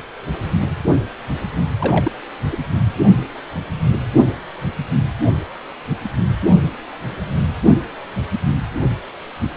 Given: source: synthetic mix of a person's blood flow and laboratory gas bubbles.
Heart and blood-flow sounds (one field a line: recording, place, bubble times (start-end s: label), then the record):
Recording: Doppler ultrasound of blood flow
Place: precordium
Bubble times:
1.78-2.12 s: bubbles
2.51-2.57 s: bubbles
From the record:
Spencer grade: 1 (occasional bubble signal discernible with the cardiac motion signal, with majority of cardiac periods free of bubbles)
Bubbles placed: only in the low amplitude regions of the cardiac cycle